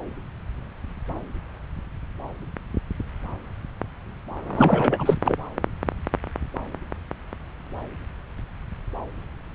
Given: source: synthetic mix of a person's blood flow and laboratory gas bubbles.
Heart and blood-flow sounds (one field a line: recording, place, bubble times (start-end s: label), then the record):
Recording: Doppler ultrasound of blood flow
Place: subclavian vein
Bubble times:
4.54-5.16 s: bubbles
5.24-5.37 s: bubbles
From the record:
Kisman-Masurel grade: 212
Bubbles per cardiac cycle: several, 3 to 8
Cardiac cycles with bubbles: 1 to 10%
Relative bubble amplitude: moderate (0.250 to 0.450)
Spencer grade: 1 (occasional bubble signal discernible with the cardiac motion signal, with majority of cardiac periods free of bubbles)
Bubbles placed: anywhere in the cardiac cycle